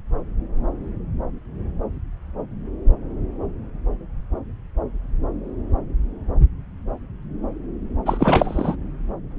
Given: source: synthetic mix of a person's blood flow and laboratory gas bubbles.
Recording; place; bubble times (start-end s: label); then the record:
Doppler ultrasound of blood flow; subclavian vein
8.05-8.76 s: bubbles
From the record:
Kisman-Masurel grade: 213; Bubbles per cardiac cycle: several, 3 to 8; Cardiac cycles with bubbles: 1 to 10%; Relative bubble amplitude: loud (0.450 to 0.775); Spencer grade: 1 (occasional bubble signal discernible with the cardiac motion signal, with majority of cardiac periods free of bubbles); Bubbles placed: anywhere in the cardiac cycle